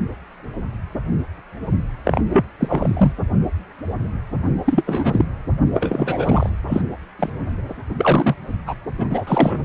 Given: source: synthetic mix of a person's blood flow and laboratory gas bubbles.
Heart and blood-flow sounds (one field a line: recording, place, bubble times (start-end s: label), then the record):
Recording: Doppler ultrasound of blood flow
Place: precordium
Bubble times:
2.04-2.21 s: bubbles
2.29-2.45 s: bubbles
2.59-3.12 s: bubbles
4.66-4.83 s: bubbles
4.85-5.25 s: bubbles
5.74-6.50 s: bubbles
6.67-6.81 s: bubbles
7.19-7.29 s: bubbles
7.97-8.36 s: bubbles
8.66-8.74 s: bubbles
8.97-9.07 s: bubbles
9.10-9.65 s: bubbles
From the record:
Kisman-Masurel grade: 233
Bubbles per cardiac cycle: several, 3 to 8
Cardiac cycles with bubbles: 50 to 99%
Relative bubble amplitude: loud (0.450 to 0.775)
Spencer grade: 3 (all of the cardiac periods contain showers or single bubble signals, but not dominating or overriding the cardiac motion signals)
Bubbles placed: anywhere in the cardiac cycle